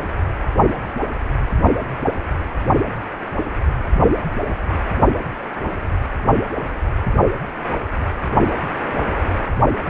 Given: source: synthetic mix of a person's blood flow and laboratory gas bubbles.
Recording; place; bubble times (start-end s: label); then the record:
Doppler ultrasound of blood flow; precordium
no bubbles
From the record:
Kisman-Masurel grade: 000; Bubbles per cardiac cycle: 0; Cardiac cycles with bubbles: 0%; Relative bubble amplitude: no bubbles discernible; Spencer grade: 0 (complete lack of bubble signals)